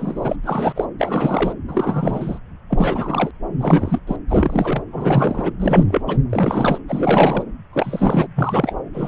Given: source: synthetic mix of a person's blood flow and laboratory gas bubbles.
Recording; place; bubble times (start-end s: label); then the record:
Doppler ultrasound of blood flow; subclavian vein
0.00-0.36 s: bubbles
0.44-0.88 s: bubbles
0.99-1.53 s: bubbles
1.68-2.39 s: bubbles
2.70-3.31 s: bubbles
3.60-3.99 s: bubbles
4.07-4.17 s: bubbles
4.29-4.82 s: bubbles
4.92-5.52 s: bubbles
5.60-6.02 s: bubbles
6.07-6.18 s: bubbles
6.29-6.78 s: bubbles
6.88-7.43 s: bubbles
7.73-8.26 s: bubbles
8.35-8.77 s: bubbles
8.93-9.07 s: bubbles
From the record:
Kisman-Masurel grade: 343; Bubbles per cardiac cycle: rolling drumbeat, 9 or more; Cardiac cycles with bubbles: 100%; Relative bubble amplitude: loud (0.450 to 0.775); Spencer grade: 3 (all of the cardiac periods contain showers or single bubble signals, but not dominating or overriding the cardiac motion signals); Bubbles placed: anywhere in the cardiac cycle